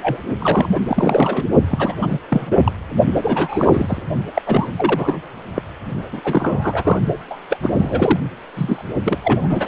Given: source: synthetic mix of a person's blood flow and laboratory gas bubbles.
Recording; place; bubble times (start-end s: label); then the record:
Doppler ultrasound of blood flow; precordium
0.00-0.24 s: bubbles
0.40-0.69 s: bubbles
0.75-0.79 s: bubbles
0.88-1.46 s: bubbles
1.71-1.95 s: bubbles
2.01-2.18 s: bubbles
2.29-2.62 s: bubbles
2.65-2.72 s: bubbles
3.13-3.18 s: bubbles
3.21-4.02 s: bubbles
4.35-4.42 s: bubbles
4.46-4.67 s: bubbles
4.76-5.18 s: bubbles
5.54-5.62 s: bubbles
6.12-6.21 s: bubbles
6.24-7.00 s: bubbles
7.30-7.36 s: bubbles
7.50-7.57 s: bubbles
7.63-8.20 s: bubbles
8.56-8.83 s: bubbles
9.04-9.18 s: bubbles
9.23-9.68 s: bubbles
From the record:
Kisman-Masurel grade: 332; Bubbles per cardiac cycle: rolling drumbeat, 9 or more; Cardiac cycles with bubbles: 50 to 99%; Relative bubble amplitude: moderate (0.250 to 0.450); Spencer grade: 3 (all of the cardiac periods contain showers or single bubble signals, but not dominating or overriding the cardiac motion signals); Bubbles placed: only in the low amplitude regions of the cardiac cycle